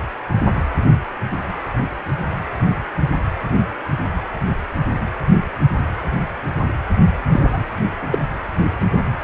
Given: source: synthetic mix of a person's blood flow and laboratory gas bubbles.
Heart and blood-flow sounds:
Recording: Doppler ultrasound of blood flow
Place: precordium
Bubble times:
7.32-7.66 s: bubbles
8.10-8.19 s: bubbles
From the record:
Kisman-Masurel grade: 212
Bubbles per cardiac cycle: several, 3 to 8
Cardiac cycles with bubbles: 1 to 10%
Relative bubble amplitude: moderate (0.250 to 0.450)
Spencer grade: 1 (occasional bubble signal discernible with the cardiac motion signal, with majority of cardiac periods free of bubbles)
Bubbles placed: anywhere in the cardiac cycle

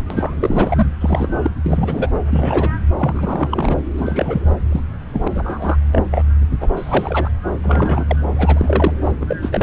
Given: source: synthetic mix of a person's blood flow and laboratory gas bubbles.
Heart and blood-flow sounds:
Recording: Doppler ultrasound of blood flow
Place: subclavian vein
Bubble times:
0.00-0.05 s: bubbles
0.10-0.35 s: bubbles
0.40-0.86 s: bubbles
1.01-1.50 s: bubbles
1.64-2.10 s: bubbles
2.15-2.19 s: bubbles
2.30-2.78 s: bubbles
2.99-3.76 s: bubbles
3.97-4.57 s: bubbles
4.71-4.81 s: bubbles
5.13-5.28 s: bubbles
5.31-5.77 s: bubbles
5.92-6.03 s: bubbles
6.12-6.24 s: bubbles
6.61-6.68 s: bubbles
6.76-7.31 s: bubbles
7.62-8.16 s: bubbles
8.35-8.93 s: bubbles
9.04-9.11 s: bubbles
9.20-9.36 s: bubbles
9.41-9.63 s: bubbles
From the record:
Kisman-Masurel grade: 242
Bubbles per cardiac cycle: several, 3 to 8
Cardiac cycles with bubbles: 100%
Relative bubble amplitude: moderate (0.250 to 0.450)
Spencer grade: 3 (all of the cardiac periods contain showers or single bubble signals, but not dominating or overriding the cardiac motion signals)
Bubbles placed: anywhere in the cardiac cycle

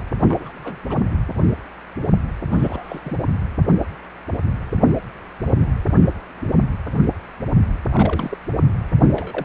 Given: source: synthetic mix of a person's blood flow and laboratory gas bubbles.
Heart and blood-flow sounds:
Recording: Doppler ultrasound of blood flow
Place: precordium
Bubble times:
0.21-0.51 s: bubbles
0.54-0.76 s: bubbles
0.90-0.98 s: bubbles
2.51-3.19 s: bubbles
7.89-8.38 s: bubbles
9.09-9.45 s: bubbles
From the record:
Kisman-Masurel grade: 221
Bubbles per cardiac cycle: several, 3 to 8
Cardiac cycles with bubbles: 10 to 50%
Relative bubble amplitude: barely perceptible (0.100 to 0.250)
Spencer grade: 2 (many but less than half of the cardiac periods contain bubble signals, singularly or in groups)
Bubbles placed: anywhere in the cardiac cycle

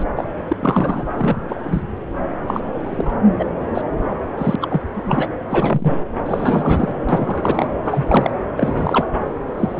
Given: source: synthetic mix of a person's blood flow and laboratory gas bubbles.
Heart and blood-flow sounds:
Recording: Doppler ultrasound of blood flow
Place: subclavian vein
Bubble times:
0.00-0.04 s: bubbles
0.16-0.25 s: bubbles
0.50-0.56 s: bubbles
0.59-1.04 s: bubbles
1.17-1.37 s: bubbles
1.48-1.83 s: bubbles
2.47-2.60 s: bubbles
2.83-3.13 s: bubbles
3.39-3.46 s: bubbles
3.74-3.82 s: bubbles
4.37-4.55 s: bubbles
4.61-4.81 s: bubbles
4.94-5.28 s: bubbles
5.50-5.94 s: bubbles
6.25-6.94 s: bubbles
7.08-7.68 s: bubbles
7.85-8.30 s: bubbles
8.57-9.06 s: bubbles
9.56-9.80 s: bubbles
From the record:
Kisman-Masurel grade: 242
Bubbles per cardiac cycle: several, 3 to 8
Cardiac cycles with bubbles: 100%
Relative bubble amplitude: moderate (0.250 to 0.450)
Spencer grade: 3 (all of the cardiac periods contain showers or single bubble signals, but not dominating or overriding the cardiac motion signals)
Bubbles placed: anywhere in the cardiac cycle

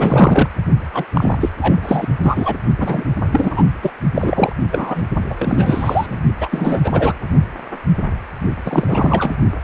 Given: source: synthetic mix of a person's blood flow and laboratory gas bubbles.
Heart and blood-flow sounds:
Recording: Doppler ultrasound of blood flow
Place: precordium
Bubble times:
0.00-0.49 s: bubbles
0.93-1.05 s: bubbles
1.13-1.50 s: bubbles
1.60-2.08 s: bubbles
2.22-2.57 s: bubbles
2.77-3.04 s: bubbles
3.32-3.63 s: bubbles
3.82-3.90 s: bubbles
4.14-4.53 s: bubbles
4.72-5.04 s: bubbles
5.29-5.35 s: bubbles
5.39-6.21 s: bubbles
6.40-7.13 s: bubbles
8.65-9.35 s: bubbles
From the record:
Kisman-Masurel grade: 333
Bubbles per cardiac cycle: rolling drumbeat, 9 or more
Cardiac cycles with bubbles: 50 to 99%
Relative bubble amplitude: loud (0.450 to 0.775)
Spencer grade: 3 (all of the cardiac periods contain showers or single bubble signals, but not dominating or overriding the cardiac motion signals)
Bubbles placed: only in the low amplitude regions of the cardiac cycle

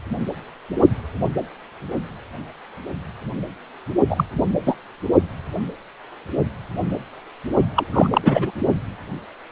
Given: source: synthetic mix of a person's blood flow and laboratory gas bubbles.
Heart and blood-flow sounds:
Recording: Doppler ultrasound of blood flow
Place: precordium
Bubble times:
4.08-4.25 s: bubbles
4.66-4.75 s: bubbles
7.75-7.87 s: bubbles
7.92-8.51 s: bubbles
From the record:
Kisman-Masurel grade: 223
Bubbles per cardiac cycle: several, 3 to 8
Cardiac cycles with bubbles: 10 to 50%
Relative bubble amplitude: loud (0.450 to 0.775)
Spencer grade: 2 (many but less than half of the cardiac periods contain bubble signals, singularly or in groups)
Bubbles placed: only in the low amplitude regions of the cardiac cycle

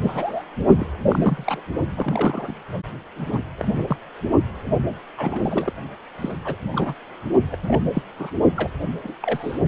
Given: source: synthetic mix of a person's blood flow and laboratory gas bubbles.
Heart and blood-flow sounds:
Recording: Doppler ultrasound of blood flow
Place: precordium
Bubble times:
0.00-0.43 s: bubbles
0.79-0.86 s: bubbles
1.08-1.62 s: bubbles
1.97-2.55 s: bubbles
3.16-3.43 s: bubbles
3.58-3.68 s: bubbles
3.76-3.97 s: bubbles
5.17-5.73 s: bubbles
6.21-6.37 s: bubbles
6.45-6.55 s: bubbles
6.61-6.94 s: bubbles
7.51-7.57 s: bubbles
7.63-7.83 s: bubbles
7.94-8.02 s: bubbles
8.19-8.31 s: bubbles
8.56-8.70 s: bubbles
9.03-9.15 s: bubbles
9.21-9.58 s: bubbles
From the record:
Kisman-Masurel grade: 242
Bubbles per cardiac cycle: several, 3 to 8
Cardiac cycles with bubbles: 100%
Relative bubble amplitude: moderate (0.250 to 0.450)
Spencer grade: 3 (all of the cardiac periods contain showers or single bubble signals, but not dominating or overriding the cardiac motion signals)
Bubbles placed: only in the low amplitude regions of the cardiac cycle

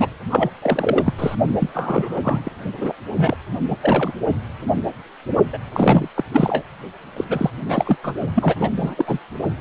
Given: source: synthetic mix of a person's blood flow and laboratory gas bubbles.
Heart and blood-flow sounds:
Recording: Doppler ultrasound of blood flow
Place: precordium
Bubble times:
0.00-0.08 s: bubbles
0.30-0.50 s: bubbles
0.61-1.14 s: bubbles
1.18-1.35 s: bubbles
1.58-1.70 s: bubbles
1.74-2.50 s: bubbles
2.77-2.95 s: bubbles
3.15-3.37 s: bubbles
3.68-3.77 s: bubbles
3.81-4.13 s: bubbles
5.52-5.58 s: bubbles
5.72-6.08 s: bubbles
6.15-6.23 s: bubbles
6.33-6.63 s: bubbles
7.17-7.25 s: bubbles
7.29-7.50 s: bubbles
7.68-7.97 s: bubbles
8.03-8.13 s: bubbles
8.35-8.55 s: bubbles
8.60-8.72 s: bubbles
8.81-9.19 s: bubbles
From the record:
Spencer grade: 3 (all of the cardiac periods contain showers or single bubble signals, but not dominating or overriding the cardiac motion signals)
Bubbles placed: only in the low amplitude regions of the cardiac cycle

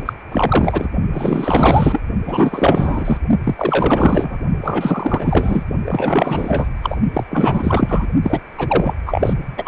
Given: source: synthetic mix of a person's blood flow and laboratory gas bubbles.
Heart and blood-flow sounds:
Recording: Doppler ultrasound of blood flow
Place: precordium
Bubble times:
0.00-0.13 s: bubbles
0.31-0.90 s: bubbles
1.13-2.03 s: bubbles
2.26-3.18 s: bubbles
3.44-4.37 s: bubbles
4.60-5.63 s: bubbles
5.85-6.67 s: bubbles
6.83-6.97 s: bubbles
7.13-7.24 s: bubbles
7.30-8.07 s: bubbles
8.22-8.40 s: bubbles
8.57-8.95 s: bubbles
9.06-9.34 s: bubbles
9.57-9.68 s: bubbles
From the record:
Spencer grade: 4 (maximum detectable bubble signal sounding continuously throughout systole and diastole of every cardiac period, and overriding the amplitude of the normal cardiac signals)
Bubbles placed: only in the low amplitude regions of the cardiac cycle

